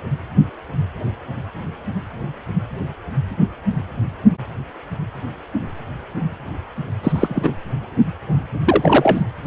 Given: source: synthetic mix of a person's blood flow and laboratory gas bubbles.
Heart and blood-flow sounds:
Doppler ultrasound of blood flow; precordium
7.03-7.53 s: bubbles
8.66-9.23 s: bubbles
From the record:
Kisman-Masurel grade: 223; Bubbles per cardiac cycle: several, 3 to 8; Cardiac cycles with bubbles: 10 to 50%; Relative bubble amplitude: loud (0.450 to 0.775); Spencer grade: 2 (many but less than half of the cardiac periods contain bubble signals, singularly or in groups); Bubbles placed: anywhere in the cardiac cycle

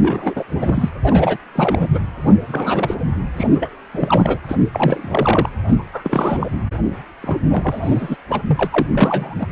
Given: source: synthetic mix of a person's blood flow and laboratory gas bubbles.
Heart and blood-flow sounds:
Doppler ultrasound of blood flow; precordium
0.00-0.44 s: bubbles
0.50-0.89 s: bubbles
1.02-1.37 s: bubbles
1.54-1.88 s: bubbles
1.94-2.00 s: bubbles
2.25-2.35 s: bubbles
2.48-2.98 s: bubbles
3.36-3.76 s: bubbles
3.91-4.39 s: bubbles
4.48-4.57 s: bubbles
4.73-5.50 s: bubbles
5.68-5.76 s: bubbles
5.93-6.47 s: bubbles
7.23-7.38 s: bubbles
7.49-8.17 s: bubbles
8.29-8.43 s: bubbles
8.47-8.68 s: bubbles
8.71-8.87 s: bubbles
8.93-9.36 s: bubbles
9.38-9.47 s: bubbles
From the record:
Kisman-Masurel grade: 343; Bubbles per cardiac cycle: rolling drumbeat, 9 or more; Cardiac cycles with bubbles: 100%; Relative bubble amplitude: loud (0.450 to 0.775); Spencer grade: 3 (all of the cardiac periods contain showers or single bubble signals, but not dominating or overriding the cardiac motion signals); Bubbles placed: anywhere in the cardiac cycle

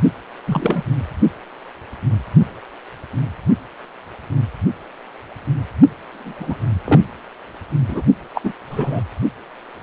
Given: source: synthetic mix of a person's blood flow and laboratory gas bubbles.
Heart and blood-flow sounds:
Doppler ultrasound of blood flow; precordium
0.47-0.83 s: bubbles
6.12-6.70 s: bubbles
6.85-7.00 s: bubbles
7.88-8.01 s: bubbles
8.34-8.41 s: bubbles
8.43-8.53 s: bubbles
8.70-9.04 s: bubbles
From the record:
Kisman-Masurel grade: 223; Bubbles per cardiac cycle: several, 3 to 8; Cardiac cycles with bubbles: 10 to 50%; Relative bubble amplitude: loud (0.450 to 0.775); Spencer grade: 2 (many but less than half of the cardiac periods contain bubble signals, singularly or in groups); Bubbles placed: only in the low amplitude regions of the cardiac cycle

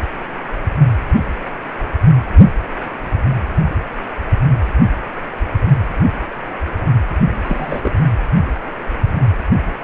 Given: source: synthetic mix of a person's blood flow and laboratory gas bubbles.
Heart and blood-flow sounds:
Doppler ultrasound of blood flow; precordium
7.44-7.95 s: bubbles
From the record:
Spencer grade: 1 (occasional bubble signal discernible with the cardiac motion signal, with majority of cardiac periods free of bubbles); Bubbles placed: anywhere in the cardiac cycle

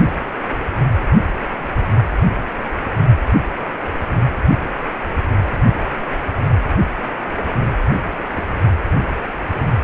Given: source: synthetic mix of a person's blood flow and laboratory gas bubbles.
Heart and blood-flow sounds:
Doppler ultrasound of blood flow; precordium
8.34-8.44 s: bubbles
From the record:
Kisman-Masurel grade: 111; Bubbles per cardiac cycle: 1 to 2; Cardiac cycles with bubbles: 1 to 10%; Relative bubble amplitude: barely perceptible (0.100 to 0.250); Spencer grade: 1 (occasional bubble signal discernible with the cardiac motion signal, with majority of cardiac periods free of bubbles); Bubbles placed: anywhere in the cardiac cycle

